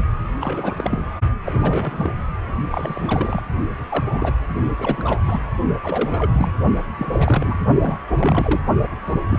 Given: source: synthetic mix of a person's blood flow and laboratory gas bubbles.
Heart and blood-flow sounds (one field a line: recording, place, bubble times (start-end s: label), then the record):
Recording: Doppler ultrasound of blood flow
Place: precordium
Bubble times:
0.40-1.11 s: bubbles
1.44-1.52 s: bubbles
1.58-2.14 s: bubbles
2.71-3.45 s: bubbles
3.88-4.33 s: bubbles
4.79-5.19 s: bubbles
5.25-5.42 s: bubbles
5.83-6.53 s: bubbles
6.98-7.59 s: bubbles
7.82-7.97 s: bubbles
8.08-8.62 s: bubbles
9.06-9.20 s: bubbles
9.29-9.38 s: bubbles
From the record:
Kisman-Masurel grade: 342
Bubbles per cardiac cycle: rolling drumbeat, 9 or more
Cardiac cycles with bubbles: 100%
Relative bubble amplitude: moderate (0.250 to 0.450)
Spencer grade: 3 (all of the cardiac periods contain showers or single bubble signals, but not dominating or overriding the cardiac motion signals)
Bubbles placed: only in the low amplitude regions of the cardiac cycle